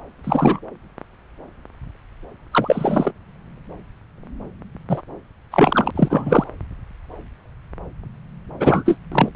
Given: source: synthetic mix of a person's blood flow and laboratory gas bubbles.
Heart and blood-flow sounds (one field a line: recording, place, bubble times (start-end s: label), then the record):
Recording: Doppler ultrasound of blood flow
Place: subclavian vein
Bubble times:
0.23-0.59 s: bubbles
2.51-3.11 s: bubbles
4.89-5.02 s: bubbles
5.52-5.91 s: bubbles
5.96-6.44 s: bubbles
8.60-8.97 s: bubbles
9.12-9.29 s: bubbles
From the record:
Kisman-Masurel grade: 223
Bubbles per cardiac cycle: several, 3 to 8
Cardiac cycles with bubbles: 10 to 50%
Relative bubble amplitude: loud (0.450 to 0.775)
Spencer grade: 2 (many but less than half of the cardiac periods contain bubble signals, singularly or in groups)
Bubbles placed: anywhere in the cardiac cycle